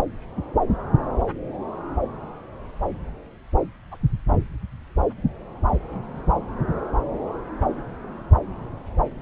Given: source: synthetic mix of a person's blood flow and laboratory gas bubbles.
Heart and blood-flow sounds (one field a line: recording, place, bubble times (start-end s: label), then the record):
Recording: Doppler ultrasound of blood flow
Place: subclavian vein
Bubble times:
3.91-3.97 s: bubbles
From the record:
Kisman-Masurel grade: 111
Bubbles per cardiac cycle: 1 to 2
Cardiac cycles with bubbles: 1 to 10%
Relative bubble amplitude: barely perceptible (0.100 to 0.250)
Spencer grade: 1 (occasional bubble signal discernible with the cardiac motion signal, with majority of cardiac periods free of bubbles)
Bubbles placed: anywhere in the cardiac cycle